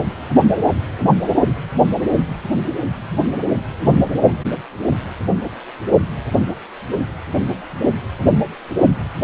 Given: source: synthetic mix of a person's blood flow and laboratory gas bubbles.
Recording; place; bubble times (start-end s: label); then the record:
Doppler ultrasound of blood flow; precordium
no bubbles
From the record:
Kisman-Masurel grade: 000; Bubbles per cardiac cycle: 0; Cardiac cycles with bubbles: 0%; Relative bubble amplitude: no bubbles discernible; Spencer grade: 0 (complete lack of bubble signals)